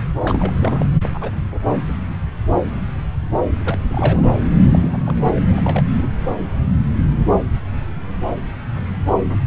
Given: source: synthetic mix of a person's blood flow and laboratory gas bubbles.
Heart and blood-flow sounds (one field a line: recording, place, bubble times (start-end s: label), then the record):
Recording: Doppler ultrasound of blood flow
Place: subclavian vein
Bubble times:
0.23-0.54 s: bubbles
0.59-0.86 s: bubbles
1.14-1.31 s: bubbles
1.74-1.84 s: bubbles
3.65-3.77 s: bubbles
3.88-4.22 s: bubbles
4.63-4.97 s: bubbles
5.06-5.15 s: bubbles
5.35-5.40 s: bubbles
5.47-5.82 s: bubbles
5.97-6.08 s: bubbles
From the record:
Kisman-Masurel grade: 221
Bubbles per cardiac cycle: several, 3 to 8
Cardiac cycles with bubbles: 10 to 50%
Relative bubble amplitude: barely perceptible (0.100 to 0.250)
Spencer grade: 2 (many but less than half of the cardiac periods contain bubble signals, singularly or in groups)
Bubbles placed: anywhere in the cardiac cycle